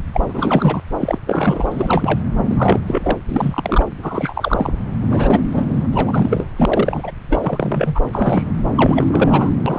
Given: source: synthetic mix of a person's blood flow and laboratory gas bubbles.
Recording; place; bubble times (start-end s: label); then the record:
Doppler ultrasound of blood flow; subclavian vein
0.13-0.23 s: bubbles
0.28-0.80 s: bubbles
0.99-1.19 s: bubbles
1.26-2.20 s: bubbles
2.46-2.80 s: bubbles
2.86-3.17 s: bubbles
3.29-3.84 s: bubbles
4.02-4.72 s: bubbles
5.01-5.46 s: bubbles
5.51-5.87 s: bubbles
5.92-6.47 s: bubbles
6.57-7.12 s: bubbles
7.30-8.01 s: bubbles
8.12-8.51 s: bubbles
8.75-9.50 s: bubbles
9.65-9.79 s: bubbles
From the record:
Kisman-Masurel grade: 342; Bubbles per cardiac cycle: rolling drumbeat, 9 or more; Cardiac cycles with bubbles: 100%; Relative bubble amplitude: moderate (0.250 to 0.450); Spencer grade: 3 (all of the cardiac periods contain showers or single bubble signals, but not dominating or overriding the cardiac motion signals); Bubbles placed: anywhere in the cardiac cycle